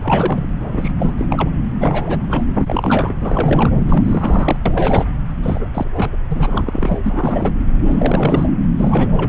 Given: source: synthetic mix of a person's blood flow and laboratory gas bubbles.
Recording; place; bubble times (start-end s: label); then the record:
Doppler ultrasound of blood flow; subclavian vein
0.03-0.50 s: bubbles
0.73-0.92 s: bubbles
0.99-1.15 s: bubbles
1.18-1.27 s: bubbles
1.29-1.51 s: bubbles
1.79-2.47 s: bubbles
2.54-3.72 s: bubbles
3.89-4.56 s: bubbles
4.65-5.05 s: bubbles
5.42-5.87 s: bubbles
5.96-6.10 s: bubbles
6.29-6.98 s: bubbles
7.04-7.51 s: bubbles
7.82-8.49 s: bubbles
8.78-9.29 s: bubbles
From the record:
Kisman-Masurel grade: 342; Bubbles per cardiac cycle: rolling drumbeat, 9 or more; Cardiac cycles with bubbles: 100%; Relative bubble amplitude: moderate (0.250 to 0.450); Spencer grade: 3 (all of the cardiac periods contain showers or single bubble signals, but not dominating or overriding the cardiac motion signals); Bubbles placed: anywhere in the cardiac cycle